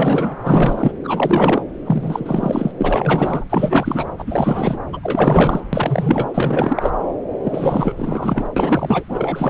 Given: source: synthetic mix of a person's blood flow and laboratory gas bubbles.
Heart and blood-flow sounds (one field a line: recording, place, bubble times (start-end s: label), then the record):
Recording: Doppler ultrasound of blood flow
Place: subclavian vein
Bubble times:
0.00-0.34 s: bubbles
0.42-0.92 s: bubbles
1.03-1.62 s: bubbles
1.84-2.74 s: bubbles
2.80-3.45 s: bubbles
3.50-4.12 s: bubbles
4.18-4.79 s: bubbles
4.92-5.00 s: bubbles
5.02-5.64 s: bubbles
5.72-6.31 s: bubbles
6.34-6.90 s: bubbles
7.43-8.46 s: bubbles
8.56-9.04 s: bubbles
9.08-9.49 s: bubbles
From the record:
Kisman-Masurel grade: 444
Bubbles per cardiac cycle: continuous sound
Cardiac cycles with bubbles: 100%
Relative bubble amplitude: maximal (0.775 to 0.999)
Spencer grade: 4 (maximum detectable bubble signal sounding continuously throughout systole and diastole of every cardiac period, and overriding the amplitude of the normal cardiac signals)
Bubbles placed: anywhere in the cardiac cycle